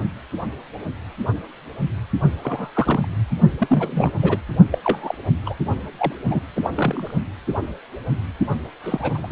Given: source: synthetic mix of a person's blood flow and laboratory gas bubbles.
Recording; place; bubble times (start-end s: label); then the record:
Doppler ultrasound of blood flow; precordium
2.43-2.70 s: bubbles
2.74-3.08 s: bubbles
3.58-4.11 s: bubbles
4.21-4.38 s: bubbles
4.71-4.78 s: bubbles
4.82-5.14 s: bubbles
5.46-5.54 s: bubbles
5.98-6.12 s: bubbles
6.28-6.41 s: bubbles
6.55-6.70 s: bubbles
6.75-7.11 s: bubbles
8.83-9.32 s: bubbles
From the record:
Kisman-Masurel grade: 232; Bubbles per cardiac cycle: several, 3 to 8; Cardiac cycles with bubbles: 50 to 99%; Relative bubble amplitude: moderate (0.250 to 0.450); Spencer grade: 3 (all of the cardiac periods contain showers or single bubble signals, but not dominating or overriding the cardiac motion signals); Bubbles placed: only in the low amplitude regions of the cardiac cycle